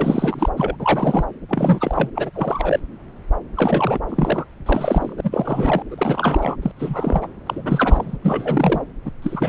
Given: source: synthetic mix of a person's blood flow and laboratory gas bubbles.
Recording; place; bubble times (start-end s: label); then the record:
Doppler ultrasound of blood flow; subclavian vein
0.00-0.49 s: bubbles
0.57-0.77 s: bubbles
0.80-1.24 s: bubbles
1.49-2.10 s: bubbles
2.15-2.31 s: bubbles
2.34-2.79 s: bubbles
3.54-3.99 s: bubbles
4.09-4.45 s: bubbles
4.66-5.13 s: bubbles
5.17-5.21 s: bubbles
5.23-5.83 s: bubbles
5.90-6.56 s: bubbles
6.62-6.71 s: bubbles
6.77-7.27 s: bubbles
7.46-8.16 s: bubbles
8.21-8.81 s: bubbles
9.05-9.11 s: bubbles
9.22-9.48 s: bubbles
From the record:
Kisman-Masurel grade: 342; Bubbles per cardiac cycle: rolling drumbeat, 9 or more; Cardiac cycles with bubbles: 100%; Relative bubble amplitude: moderate (0.250 to 0.450); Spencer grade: 3 (all of the cardiac periods contain showers or single bubble signals, but not dominating or overriding the cardiac motion signals); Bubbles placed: anywhere in the cardiac cycle